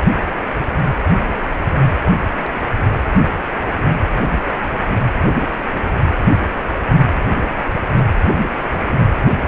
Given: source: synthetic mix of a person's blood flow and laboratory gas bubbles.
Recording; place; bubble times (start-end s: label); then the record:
Doppler ultrasound of blood flow; precordium
no bubbles
From the record:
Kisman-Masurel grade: 000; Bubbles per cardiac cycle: 0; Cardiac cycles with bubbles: 0%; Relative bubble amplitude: no bubbles discernible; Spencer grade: 0 (complete lack of bubble signals)